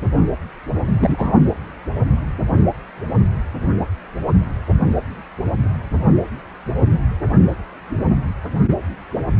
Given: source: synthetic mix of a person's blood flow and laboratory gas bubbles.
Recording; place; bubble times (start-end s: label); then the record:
Doppler ultrasound of blood flow; precordium
0.87-0.93 s: bubbles
0.99-1.42 s: bubbles
From the record:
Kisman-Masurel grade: 222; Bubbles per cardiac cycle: several, 3 to 8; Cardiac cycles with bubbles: 10 to 50%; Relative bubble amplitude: moderate (0.250 to 0.450); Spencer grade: 2 (many but less than half of the cardiac periods contain bubble signals, singularly or in groups); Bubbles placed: anywhere in the cardiac cycle